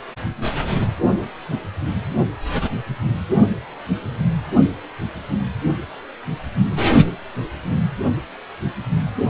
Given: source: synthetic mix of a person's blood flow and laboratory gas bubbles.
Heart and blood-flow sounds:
Doppler ultrasound of blood flow; precordium
no bubbles
From the record:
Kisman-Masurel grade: 000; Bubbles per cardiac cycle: 0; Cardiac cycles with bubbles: 0%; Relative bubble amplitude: no bubbles discernible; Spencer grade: 0 (complete lack of bubble signals)

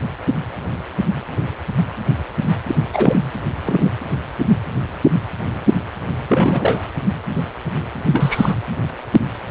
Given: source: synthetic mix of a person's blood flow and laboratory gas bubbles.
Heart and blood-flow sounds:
Doppler ultrasound of blood flow; precordium
2.67-2.75 s: bubbles
2.92-3.24 s: bubbles
3.64-3.90 s: bubbles
6.28-6.83 s: bubbles
8.12-8.54 s: bubbles
From the record:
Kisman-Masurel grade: 222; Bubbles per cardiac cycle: several, 3 to 8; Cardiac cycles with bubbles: 10 to 50%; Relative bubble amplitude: moderate (0.250 to 0.450); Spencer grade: 2 (many but less than half of the cardiac periods contain bubble signals, singularly or in groups); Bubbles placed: anywhere in the cardiac cycle

